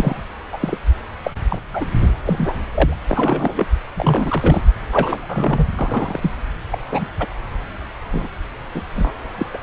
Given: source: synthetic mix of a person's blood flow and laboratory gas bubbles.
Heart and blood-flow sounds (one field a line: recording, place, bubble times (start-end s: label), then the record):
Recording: Doppler ultrasound of blood flow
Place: subclavian vein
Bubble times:
0.00-0.21 s: bubbles
0.52-0.77 s: bubbles
1.23-1.32 s: bubbles
1.48-1.61 s: bubbles
1.72-1.85 s: bubbles
2.01-2.09 s: bubbles
2.25-2.56 s: bubbles
2.71-2.98 s: bubbles
3.08-3.66 s: bubbles
3.95-4.61 s: bubbles
4.92-5.68 s: bubbles
5.79-6.32 s: bubbles
6.72-6.78 s: bubbles
6.92-7.07 s: bubbles
7.19-7.27 s: bubbles
8.12-8.28 s: bubbles
8.74-8.82 s: bubbles
8.95-9.11 s: bubbles
9.38-9.46 s: bubbles
9.53-9.57 s: bubbles
From the record:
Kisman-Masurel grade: 233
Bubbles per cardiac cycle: several, 3 to 8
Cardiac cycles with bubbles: 50 to 99%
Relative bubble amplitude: loud (0.450 to 0.775)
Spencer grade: 3 (all of the cardiac periods contain showers or single bubble signals, but not dominating or overriding the cardiac motion signals)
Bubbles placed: anywhere in the cardiac cycle